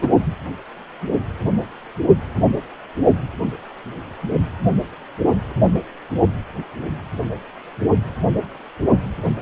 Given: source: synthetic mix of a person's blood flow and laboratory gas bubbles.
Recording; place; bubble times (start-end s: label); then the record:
Doppler ultrasound of blood flow; precordium
0.00-0.08 s: bubbles
From the record:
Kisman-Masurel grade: 213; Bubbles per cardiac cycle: several, 3 to 8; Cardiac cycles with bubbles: 1 to 10%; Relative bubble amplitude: loud (0.450 to 0.775); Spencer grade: 1 (occasional bubble signal discernible with the cardiac motion signal, with majority of cardiac periods free of bubbles); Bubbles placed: only in the low amplitude regions of the cardiac cycle